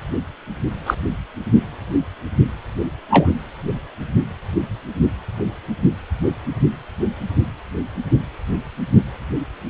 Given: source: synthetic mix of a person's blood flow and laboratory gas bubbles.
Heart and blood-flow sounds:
Doppler ultrasound of blood flow; precordium
0.86-0.95 s: bubbles
3.08-3.35 s: bubbles
From the record:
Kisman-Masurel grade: 123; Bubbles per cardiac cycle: 1 to 2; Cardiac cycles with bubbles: 10 to 50%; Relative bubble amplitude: loud (0.450 to 0.775); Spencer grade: 2 (many but less than half of the cardiac periods contain bubble signals, singularly or in groups); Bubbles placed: anywhere in the cardiac cycle

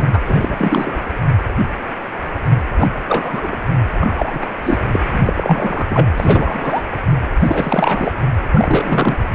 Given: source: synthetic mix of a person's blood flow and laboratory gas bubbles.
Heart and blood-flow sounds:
Doppler ultrasound of blood flow; precordium
0.00-0.21 s: bubbles
0.25-1.04 s: bubbles
2.78-2.88 s: bubbles
3.08-3.56 s: bubbles
4.00-4.56 s: bubbles
4.63-4.78 s: bubbles
4.87-5.00 s: bubbles
5.08-6.11 s: bubbles
6.16-6.83 s: bubbles
7.40-8.14 s: bubbles
8.51-9.17 s: bubbles
From the record:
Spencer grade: 3 (all of the cardiac periods contain showers or single bubble signals, but not dominating or overriding the cardiac motion signals); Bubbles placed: anywhere in the cardiac cycle

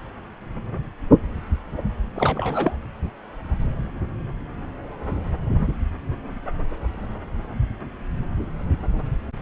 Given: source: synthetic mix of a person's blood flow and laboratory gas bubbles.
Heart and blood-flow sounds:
Doppler ultrasound of blood flow; subclavian vein
2.16-2.78 s: bubbles
From the record:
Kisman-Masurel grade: 212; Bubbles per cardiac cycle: several, 3 to 8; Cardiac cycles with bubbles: 1 to 10%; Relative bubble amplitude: moderate (0.250 to 0.450); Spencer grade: 1 (occasional bubble signal discernible with the cardiac motion signal, with majority of cardiac periods free of bubbles); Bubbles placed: anywhere in the cardiac cycle

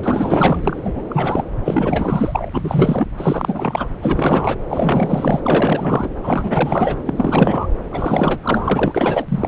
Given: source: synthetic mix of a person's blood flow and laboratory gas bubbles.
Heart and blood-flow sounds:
Doppler ultrasound of blood flow; subclavian vein
0.00-1.03 s: bubbles
1.09-1.45 s: bubbles
1.63-2.50 s: bubbles
2.54-3.10 s: bubbles
3.17-3.89 s: bubbles
4.00-4.57 s: bubbles
4.69-5.40 s: bubbles
5.45-6.08 s: bubbles
6.22-6.96 s: bubbles
7.05-7.67 s: bubbles
7.92-9.48 s: bubbles
From the record:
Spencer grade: 4 (maximum detectable bubble signal sounding continuously throughout systole and diastole of every cardiac period, and overriding the amplitude of the normal cardiac signals); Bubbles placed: anywhere in the cardiac cycle

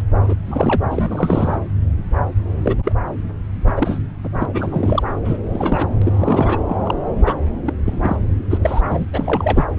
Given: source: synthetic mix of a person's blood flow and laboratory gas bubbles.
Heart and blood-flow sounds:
Doppler ultrasound of blood flow; subclavian vein
0.00-0.02 s: bubbles
0.27-0.34 s: bubbles
0.45-0.81 s: bubbles
0.90-1.61 s: bubbles
2.62-2.75 s: bubbles
2.85-2.94 s: bubbles
3.67-3.73 s: bubbles
3.76-3.99 s: bubbles
4.23-4.29 s: bubbles
4.40-4.46 s: bubbles
4.54-5.03 s: bubbles
5.25-5.38 s: bubbles
5.51-5.89 s: bubbles
6.01-6.58 s: bubbles
6.69-6.78 s: bubbles
6.83-6.95 s: bubbles
7.26-7.33 s: bubbles
7.66-7.73 s: bubbles
7.86-8.16 s: bubbles
8.50-8.57 s: bubbles
8.61-8.81 s: bubbles
8.88-9.05 s: bubbles
9.13-9.65 s: bubbles
9.75-9.79 s: bubbles
From the record:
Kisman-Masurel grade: 232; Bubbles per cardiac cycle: several, 3 to 8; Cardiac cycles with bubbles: 50 to 99%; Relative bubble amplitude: moderate (0.250 to 0.450); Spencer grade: 3 (all of the cardiac periods contain showers or single bubble signals, but not dominating or overriding the cardiac motion signals); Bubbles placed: anywhere in the cardiac cycle

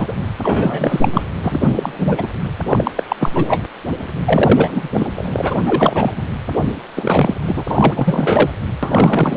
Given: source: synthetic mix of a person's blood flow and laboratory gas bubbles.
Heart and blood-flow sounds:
Doppler ultrasound of blood flow; precordium
0.00-0.13 s: bubbles
0.42-1.09 s: bubbles
1.11-1.23 s: bubbles
1.42-2.29 s: bubbles
2.66-2.91 s: bubbles
2.96-3.04 s: bubbles
3.08-3.16 s: bubbles
3.20-3.31 s: bubbles
3.35-3.46 s: bubbles
3.48-3.63 s: bubbles
4.25-4.88 s: bubbles
4.93-5.07 s: bubbles
5.15-5.61 s: bubbles
5.65-6.12 s: bubbles
6.17-6.22 s: bubbles
6.65-6.72 s: bubbles
6.96-7.34 s: bubbles
7.46-7.64 s: bubbles
7.68-8.53 s: bubbles
8.82-9.37 s: bubbles
From the record:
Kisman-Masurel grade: 343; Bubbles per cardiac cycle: rolling drumbeat, 9 or more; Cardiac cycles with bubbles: 100%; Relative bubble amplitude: loud (0.450 to 0.775); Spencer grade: 3 (all of the cardiac periods contain showers or single bubble signals, but not dominating or overriding the cardiac motion signals); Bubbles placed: anywhere in the cardiac cycle

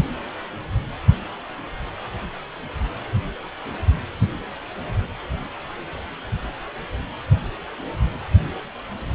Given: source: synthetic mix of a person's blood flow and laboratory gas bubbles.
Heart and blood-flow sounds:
Doppler ultrasound of blood flow; precordium
no bubbles
From the record:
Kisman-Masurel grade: 000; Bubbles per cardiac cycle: 0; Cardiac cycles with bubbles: 0%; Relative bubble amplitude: no bubbles discernible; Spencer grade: 0 (complete lack of bubble signals)

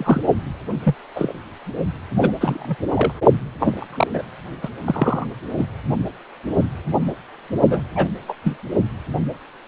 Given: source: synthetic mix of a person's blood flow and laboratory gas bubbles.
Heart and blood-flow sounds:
Doppler ultrasound of blood flow; precordium
0.00-0.22 s: bubbles
0.83-0.95 s: bubbles
1.16-1.33 s: bubbles
2.20-2.31 s: bubbles
2.41-2.76 s: bubbles
2.95-3.12 s: bubbles
3.60-3.87 s: bubbles
3.90-4.23 s: bubbles
4.62-4.69 s: bubbles
4.84-5.25 s: bubbles
5.57-5.65 s: bubbles
7.69-7.81 s: bubbles
7.95-8.07 s: bubbles
8.28-8.33 s: bubbles
8.44-8.58 s: bubbles
From the record:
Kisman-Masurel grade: 232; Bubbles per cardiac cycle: several, 3 to 8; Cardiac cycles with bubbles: 50 to 99%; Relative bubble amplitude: moderate (0.250 to 0.450); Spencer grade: 3 (all of the cardiac periods contain showers or single bubble signals, but not dominating or overriding the cardiac motion signals); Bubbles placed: only in the low amplitude regions of the cardiac cycle

